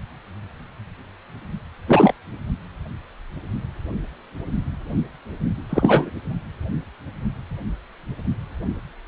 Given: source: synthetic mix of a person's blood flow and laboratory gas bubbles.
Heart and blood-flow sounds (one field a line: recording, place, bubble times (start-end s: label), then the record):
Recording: Doppler ultrasound of blood flow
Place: precordium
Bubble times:
1.88-2.13 s: bubbles
5.70-6.10 s: bubbles
From the record:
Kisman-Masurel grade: 223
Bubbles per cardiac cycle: several, 3 to 8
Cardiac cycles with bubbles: 10 to 50%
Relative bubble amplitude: loud (0.450 to 0.775)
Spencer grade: 2 (many but less than half of the cardiac periods contain bubble signals, singularly or in groups)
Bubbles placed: only in the low amplitude regions of the cardiac cycle